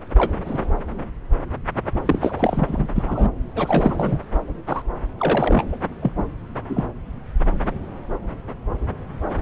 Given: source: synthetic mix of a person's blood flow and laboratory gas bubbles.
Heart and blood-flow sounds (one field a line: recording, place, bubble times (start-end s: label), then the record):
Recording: Doppler ultrasound of blood flow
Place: subclavian vein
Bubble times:
0.15-0.32 s: bubbles
0.45-0.58 s: bubbles
2.06-2.88 s: bubbles
2.95-3.29 s: bubbles
3.55-4.19 s: bubbles
4.67-4.82 s: bubbles
5.18-5.64 s: bubbles
5.72-5.76 s: bubbles
6.02-6.12 s: bubbles
6.69-6.84 s: bubbles
From the record:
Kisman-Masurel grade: 332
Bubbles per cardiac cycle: rolling drumbeat, 9 or more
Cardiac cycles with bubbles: 50 to 99%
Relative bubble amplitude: moderate (0.250 to 0.450)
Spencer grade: 3 (all of the cardiac periods contain showers or single bubble signals, but not dominating or overriding the cardiac motion signals)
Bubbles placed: anywhere in the cardiac cycle